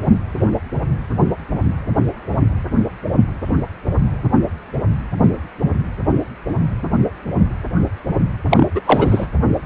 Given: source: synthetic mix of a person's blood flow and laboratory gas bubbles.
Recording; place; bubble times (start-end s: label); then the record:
Doppler ultrasound of blood flow; precordium
8.50-8.67 s: bubbles
8.75-8.80 s: bubbles
8.86-9.27 s: bubbles
From the record:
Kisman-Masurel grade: 223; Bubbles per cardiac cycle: several, 3 to 8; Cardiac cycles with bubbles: 10 to 50%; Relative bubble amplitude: loud (0.450 to 0.775); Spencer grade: 2 (many but less than half of the cardiac periods contain bubble signals, singularly or in groups); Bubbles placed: anywhere in the cardiac cycle